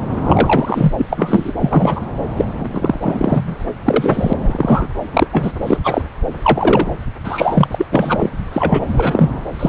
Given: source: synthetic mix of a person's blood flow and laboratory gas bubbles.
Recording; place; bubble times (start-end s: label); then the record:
Doppler ultrasound of blood flow; subclavian vein
0.23-0.93 s: bubbles
0.97-1.06 s: bubbles
1.10-1.52 s: bubbles
1.60-2.01 s: bubbles
2.36-2.45 s: bubbles
2.60-3.00 s: bubbles
3.03-3.55 s: bubbles
3.85-4.33 s: bubbles
4.47-4.88 s: bubbles
5.13-5.27 s: bubbles
5.32-5.56 s: bubbles
5.60-5.79 s: bubbles
5.83-6.02 s: bubbles
6.43-6.89 s: bubbles
7.24-7.68 s: bubbles
7.71-7.75 s: bubbles
7.78-7.85 s: bubbles
7.91-8.31 s: bubbles
8.53-8.87 s: bubbles
8.96-9.29 s: bubbles
9.59-9.68 s: bubbles
From the record:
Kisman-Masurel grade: 243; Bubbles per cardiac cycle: several, 3 to 8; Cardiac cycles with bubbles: 100%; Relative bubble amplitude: loud (0.450 to 0.775); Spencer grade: 3 (all of the cardiac periods contain showers or single bubble signals, but not dominating or overriding the cardiac motion signals); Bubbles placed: anywhere in the cardiac cycle